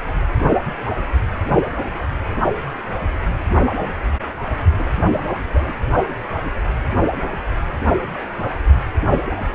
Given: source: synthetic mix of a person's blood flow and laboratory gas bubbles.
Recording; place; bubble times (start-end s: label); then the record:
Doppler ultrasound of blood flow; precordium
4.72-4.87 s: bubbles
5.13-5.21 s: bubbles
5.51-5.75 s: bubbles
From the record:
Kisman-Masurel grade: 211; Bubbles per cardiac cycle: several, 3 to 8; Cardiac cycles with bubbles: 1 to 10%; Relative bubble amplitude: barely perceptible (0.100 to 0.250); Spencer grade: 1 (occasional bubble signal discernible with the cardiac motion signal, with majority of cardiac periods free of bubbles); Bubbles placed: only in the low amplitude regions of the cardiac cycle